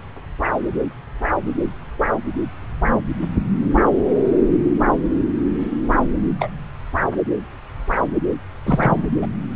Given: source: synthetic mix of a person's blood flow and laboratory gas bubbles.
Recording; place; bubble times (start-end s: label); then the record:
Doppler ultrasound of blood flow; subclavian vein
6.39-6.50 s: bubbles
8.65-9.05 s: bubbles
9.21-9.27 s: bubbles
9.54-9.56 s: bubbles
From the record:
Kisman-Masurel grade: 122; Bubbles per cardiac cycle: 1 to 2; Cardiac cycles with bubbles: 10 to 50%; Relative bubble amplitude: moderate (0.250 to 0.450); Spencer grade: 2 (many but less than half of the cardiac periods contain bubble signals, singularly or in groups); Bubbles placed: anywhere in the cardiac cycle